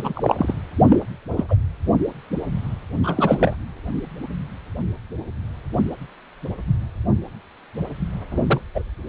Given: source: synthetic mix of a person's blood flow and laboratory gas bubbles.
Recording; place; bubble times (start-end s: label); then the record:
Doppler ultrasound of blood flow; precordium
0.00-0.36 s: bubbles
0.38-0.53 s: bubbles
0.89-1.00 s: bubbles
1.36-1.44 s: bubbles
1.49-1.55 s: bubbles
3.03-3.56 s: bubbles
8.31-8.43 s: bubbles
8.47-8.61 s: bubbles
8.74-8.83 s: bubbles
From the record:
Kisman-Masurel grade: 222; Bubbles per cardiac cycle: several, 3 to 8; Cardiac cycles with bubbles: 10 to 50%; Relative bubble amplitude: moderate (0.250 to 0.450); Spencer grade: 2 (many but less than half of the cardiac periods contain bubble signals, singularly or in groups); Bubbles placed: anywhere in the cardiac cycle